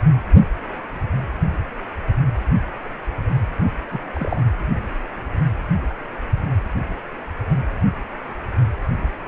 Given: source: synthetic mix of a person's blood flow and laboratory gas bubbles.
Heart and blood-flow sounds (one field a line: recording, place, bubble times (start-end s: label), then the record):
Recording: Doppler ultrasound of blood flow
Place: precordium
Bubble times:
3.90-4.02 s: bubbles
4.13-4.42 s: bubbles
From the record:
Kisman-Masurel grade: 121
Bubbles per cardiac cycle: 1 to 2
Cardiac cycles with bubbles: 10 to 50%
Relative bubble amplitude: barely perceptible (0.100 to 0.250)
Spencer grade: 2 (many but less than half of the cardiac periods contain bubble signals, singularly or in groups)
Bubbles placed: anywhere in the cardiac cycle